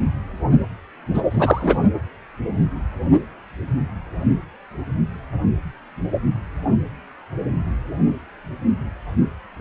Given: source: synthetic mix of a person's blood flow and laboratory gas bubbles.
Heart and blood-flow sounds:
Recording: Doppler ultrasound of blood flow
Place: precordium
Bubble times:
1.14-1.22 s: bubbles
1.30-1.79 s: bubbles
From the record:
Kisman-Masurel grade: 213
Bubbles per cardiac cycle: several, 3 to 8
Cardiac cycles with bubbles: 1 to 10%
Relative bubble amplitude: loud (0.450 to 0.775)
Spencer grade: 1 (occasional bubble signal discernible with the cardiac motion signal, with majority of cardiac periods free of bubbles)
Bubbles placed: only in the low amplitude regions of the cardiac cycle

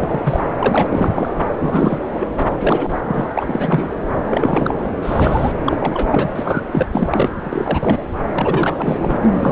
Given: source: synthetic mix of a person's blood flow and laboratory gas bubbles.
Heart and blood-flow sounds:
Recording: Doppler ultrasound of blood flow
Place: subclavian vein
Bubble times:
0.00-0.21 s: bubbles
0.24-0.40 s: bubbles
0.59-0.86 s: bubbles
0.91-1.29 s: bubbles
1.60-1.99 s: bubbles
2.15-2.26 s: bubbles
2.60-2.96 s: bubbles
3.05-3.28 s: bubbles
3.35-3.95 s: bubbles
4.28-4.74 s: bubbles
5.02-5.53 s: bubbles
5.63-5.77 s: bubbles
5.80-6.07 s: bubbles
6.13-6.29 s: bubbles
6.35-6.62 s: bubbles
6.71-6.87 s: bubbles
6.92-7.30 s: bubbles
7.45-8.03 s: bubbles
8.32-9.17 s: bubbles
9.21-9.52 s: bubbles
From the record:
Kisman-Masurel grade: 342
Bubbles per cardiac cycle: rolling drumbeat, 9 or more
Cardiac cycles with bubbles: 100%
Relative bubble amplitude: moderate (0.250 to 0.450)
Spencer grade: 3 (all of the cardiac periods contain showers or single bubble signals, but not dominating or overriding the cardiac motion signals)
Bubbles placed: anywhere in the cardiac cycle

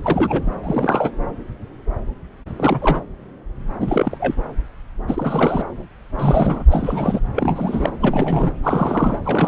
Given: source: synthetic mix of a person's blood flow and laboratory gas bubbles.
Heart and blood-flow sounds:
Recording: Doppler ultrasound of blood flow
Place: subclavian vein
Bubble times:
0.03-0.56 s: bubbles
0.63-1.11 s: bubbles
2.56-3.02 s: bubbles
3.80-4.17 s: bubbles
4.19-4.34 s: bubbles
5.07-5.67 s: bubbles
6.18-6.65 s: bubbles
6.71-7.20 s: bubbles
7.35-7.92 s: bubbles
7.99-8.54 s: bubbles
8.62-9.20 s: bubbles
9.25-9.47 s: bubbles
From the record:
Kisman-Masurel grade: 332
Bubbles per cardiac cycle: rolling drumbeat, 9 or more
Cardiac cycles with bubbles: 50 to 99%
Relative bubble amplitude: moderate (0.250 to 0.450)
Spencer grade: 3 (all of the cardiac periods contain showers or single bubble signals, but not dominating or overriding the cardiac motion signals)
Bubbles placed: anywhere in the cardiac cycle

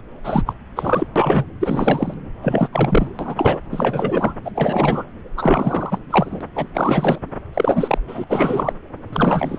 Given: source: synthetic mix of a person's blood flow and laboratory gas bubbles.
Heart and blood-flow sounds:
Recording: Doppler ultrasound of blood flow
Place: subclavian vein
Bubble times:
0.24-0.43 s: bubbles
0.45-0.53 s: bubbles
0.75-1.07 s: bubbles
1.16-1.45 s: bubbles
1.60-2.14 s: bubbles
2.42-2.67 s: bubbles
2.72-3.08 s: bubbles
3.19-3.59 s: bubbles
3.71-4.34 s: bubbles
4.45-4.52 s: bubbles
4.55-5.04 s: bubbles
5.37-5.99 s: bubbles
6.10-6.44 s: bubbles
6.55-6.67 s: bubbles
6.74-7.18 s: bubbles
7.54-7.98 s: bubbles
8.08-8.24 s: bubbles
8.29-8.73 s: bubbles
9.12-9.59 s: bubbles
From the record:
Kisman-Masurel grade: 343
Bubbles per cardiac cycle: rolling drumbeat, 9 or more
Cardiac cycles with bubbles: 100%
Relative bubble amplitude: loud (0.450 to 0.775)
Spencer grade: 3 (all of the cardiac periods contain showers or single bubble signals, but not dominating or overriding the cardiac motion signals)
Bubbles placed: anywhere in the cardiac cycle

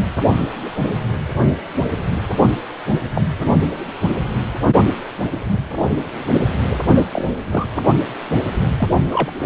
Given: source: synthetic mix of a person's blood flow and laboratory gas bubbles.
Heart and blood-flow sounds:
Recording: Doppler ultrasound of blood flow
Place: precordium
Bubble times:
2.87-3.00 s: bubbles
3.15-3.21 s: bubbles
6.94-7.07 s: bubbles
7.12-7.33 s: bubbles
7.47-7.66 s: bubbles
8.79-8.88 s: bubbles
9.09-9.31 s: bubbles
9.38-9.45 s: bubbles
From the record:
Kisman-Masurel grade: 222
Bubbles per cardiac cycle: several, 3 to 8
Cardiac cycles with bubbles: 10 to 50%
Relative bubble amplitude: moderate (0.250 to 0.450)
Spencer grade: 2 (many but less than half of the cardiac periods contain bubble signals, singularly or in groups)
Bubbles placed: anywhere in the cardiac cycle

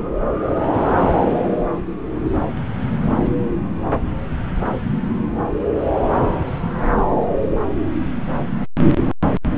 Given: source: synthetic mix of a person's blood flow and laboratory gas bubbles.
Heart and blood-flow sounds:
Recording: Doppler ultrasound of blood flow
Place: subclavian vein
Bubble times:
no bubbles
From the record:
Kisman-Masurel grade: 000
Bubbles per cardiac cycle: 0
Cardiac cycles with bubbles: 0%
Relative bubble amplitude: no bubbles discernible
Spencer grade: 0 (complete lack of bubble signals)

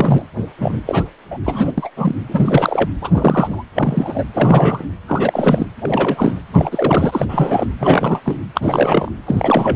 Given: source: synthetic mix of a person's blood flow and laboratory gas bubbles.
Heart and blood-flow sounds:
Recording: Doppler ultrasound of blood flow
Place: precordium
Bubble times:
0.00-0.25 s: bubbles
0.60-0.80 s: bubbles
0.86-1.04 s: bubbles
1.31-1.38 s: bubbles
1.45-1.72 s: bubbles
1.78-1.90 s: bubbles
1.96-2.16 s: bubbles
2.28-2.90 s: bubbles
3.01-3.63 s: bubbles
3.75-4.24 s: bubbles
4.33-4.84 s: bubbles
5.08-5.66 s: bubbles
5.79-6.40 s: bubbles
6.54-7.26 s: bubbles
7.29-7.67 s: bubbles
7.79-8.20 s: bubbles
8.25-8.38 s: bubbles
8.54-9.11 s: bubbles
9.27-9.76 s: bubbles
From the record:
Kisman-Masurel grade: 343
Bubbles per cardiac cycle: rolling drumbeat, 9 or more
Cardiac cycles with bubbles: 100%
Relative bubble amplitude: loud (0.450 to 0.775)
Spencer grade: 3 (all of the cardiac periods contain showers or single bubble signals, but not dominating or overriding the cardiac motion signals)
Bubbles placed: anywhere in the cardiac cycle

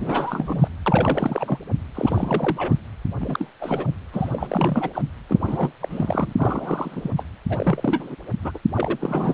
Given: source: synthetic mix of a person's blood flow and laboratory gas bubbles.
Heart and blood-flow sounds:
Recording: Doppler ultrasound of blood flow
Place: precordium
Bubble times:
0.00-0.69 s: bubbles
0.86-1.58 s: bubbles
1.95-2.76 s: bubbles
3.21-3.49 s: bubbles
3.61-3.90 s: bubbles
4.12-4.90 s: bubbles
4.93-5.02 s: bubbles
5.29-5.71 s: bubbles
5.81-6.33 s: bubbles
6.37-7.11 s: bubbles
7.17-7.23 s: bubbles
7.49-8.15 s: bubbles
8.42-8.52 s: bubbles
8.54-8.59 s: bubbles
8.76-9.34 s: bubbles
From the record:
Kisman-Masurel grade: 342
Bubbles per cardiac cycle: rolling drumbeat, 9 or more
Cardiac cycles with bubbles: 100%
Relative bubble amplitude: moderate (0.250 to 0.450)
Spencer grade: 3 (all of the cardiac periods contain showers or single bubble signals, but not dominating or overriding the cardiac motion signals)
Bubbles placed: anywhere in the cardiac cycle

